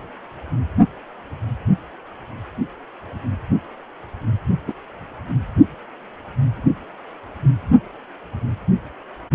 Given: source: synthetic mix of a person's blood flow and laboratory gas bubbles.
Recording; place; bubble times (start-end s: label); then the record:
Doppler ultrasound of blood flow; precordium
4.67-4.72 s: bubbles
From the record:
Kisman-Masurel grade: 113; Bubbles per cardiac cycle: 1 to 2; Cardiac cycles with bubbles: 1 to 10%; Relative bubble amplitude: loud (0.450 to 0.775); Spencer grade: 1 (occasional bubble signal discernible with the cardiac motion signal, with majority of cardiac periods free of bubbles); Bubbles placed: only in the low amplitude regions of the cardiac cycle